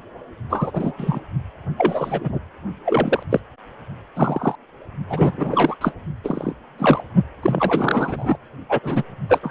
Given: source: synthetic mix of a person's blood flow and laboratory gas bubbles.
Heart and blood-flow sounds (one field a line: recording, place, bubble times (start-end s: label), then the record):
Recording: Doppler ultrasound of blood flow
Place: precordium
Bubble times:
0.49-0.92 s: bubbles
0.97-1.20 s: bubbles
1.77-2.39 s: bubbles
2.85-3.23 s: bubbles
3.30-3.40 s: bubbles
4.15-4.55 s: bubbles
5.09-5.32 s: bubbles
5.38-5.75 s: bubbles
5.81-5.93 s: bubbles
6.23-6.53 s: bubbles
6.78-7.02 s: bubbles
7.42-8.37 s: bubbles
8.69-8.79 s: bubbles
8.82-9.03 s: bubbles
9.29-9.40 s: bubbles
9.42-9.51 s: bubbles
From the record:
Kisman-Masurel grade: 243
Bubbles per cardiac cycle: several, 3 to 8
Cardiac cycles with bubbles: 100%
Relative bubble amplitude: loud (0.450 to 0.775)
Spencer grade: 3 (all of the cardiac periods contain showers or single bubble signals, but not dominating or overriding the cardiac motion signals)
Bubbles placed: only in the low amplitude regions of the cardiac cycle